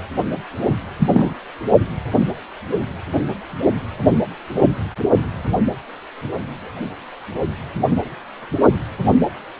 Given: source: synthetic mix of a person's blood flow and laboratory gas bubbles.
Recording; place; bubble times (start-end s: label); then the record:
Doppler ultrasound of blood flow; precordium
0.99-1.08 s: bubbles
1.12-1.33 s: bubbles
From the record:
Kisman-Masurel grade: 113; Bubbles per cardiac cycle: 1 to 2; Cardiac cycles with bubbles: 1 to 10%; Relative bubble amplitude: loud (0.450 to 0.775); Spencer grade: 1 (occasional bubble signal discernible with the cardiac motion signal, with majority of cardiac periods free of bubbles); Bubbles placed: only in the low amplitude regions of the cardiac cycle